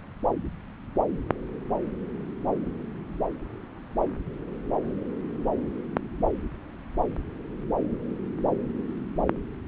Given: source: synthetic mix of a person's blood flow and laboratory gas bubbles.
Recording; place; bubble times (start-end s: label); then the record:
Doppler ultrasound of blood flow; subclavian vein
no bubbles
From the record:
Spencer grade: 0 (complete lack of bubble signals)